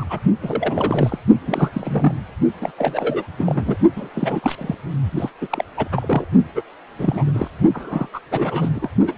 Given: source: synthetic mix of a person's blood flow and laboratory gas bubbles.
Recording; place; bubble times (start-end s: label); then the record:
Doppler ultrasound of blood flow; precordium
0.00-0.07 s: bubbles
0.09-0.19 s: bubbles
0.43-1.18 s: bubbles
1.46-2.15 s: bubbles
2.60-2.71 s: bubbles
2.77-3.23 s: bubbles
3.38-3.77 s: bubbles
3.96-4.08 s: bubbles
4.14-4.75 s: bubbles
5.12-5.30 s: bubbles
5.41-5.65 s: bubbles
5.77-5.88 s: bubbles
5.92-6.25 s: bubbles
6.55-6.62 s: bubbles
6.98-7.48 s: bubbles
7.73-8.08 s: bubbles
8.13-8.19 s: bubbles
8.31-8.88 s: bubbles
9.07-9.13 s: bubbles
From the record:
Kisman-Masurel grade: 342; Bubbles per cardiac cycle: rolling drumbeat, 9 or more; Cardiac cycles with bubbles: 100%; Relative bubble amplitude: moderate (0.250 to 0.450); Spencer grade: 3 (all of the cardiac periods contain showers or single bubble signals, but not dominating or overriding the cardiac motion signals); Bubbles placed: only in the low amplitude regions of the cardiac cycle